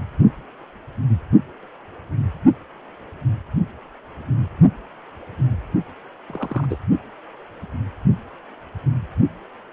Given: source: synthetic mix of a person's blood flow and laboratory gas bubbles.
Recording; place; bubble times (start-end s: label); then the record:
Doppler ultrasound of blood flow; precordium
6.28-6.67 s: bubbles
6.70-6.78 s: bubbles
From the record:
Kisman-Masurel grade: 111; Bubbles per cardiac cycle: 1 to 2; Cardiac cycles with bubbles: 1 to 10%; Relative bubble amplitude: barely perceptible (0.100 to 0.250); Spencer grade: 1 (occasional bubble signal discernible with the cardiac motion signal, with majority of cardiac periods free of bubbles); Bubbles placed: only in the low amplitude regions of the cardiac cycle